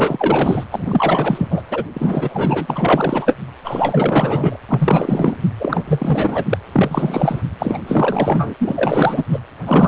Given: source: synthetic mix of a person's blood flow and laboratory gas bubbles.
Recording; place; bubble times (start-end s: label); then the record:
Doppler ultrasound of blood flow; precordium
0.00-0.64 s: bubbles
0.71-1.62 s: bubbles
1.71-1.84 s: bubbles
1.93-3.37 s: bubbles
3.63-4.56 s: bubbles
4.68-5.37 s: bubbles
5.59-5.84 s: bubbles
5.88-6.45 s: bubbles
6.49-6.58 s: bubbles
6.72-7.42 s: bubbles
7.59-7.79 s: bubbles
7.82-8.54 s: bubbles
8.59-9.23 s: bubbles
9.32-9.40 s: bubbles
9.65-9.87 s: bubbles
From the record:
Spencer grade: 4 (maximum detectable bubble signal sounding continuously throughout systole and diastole of every cardiac period, and overriding the amplitude of the normal cardiac signals); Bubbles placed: anywhere in the cardiac cycle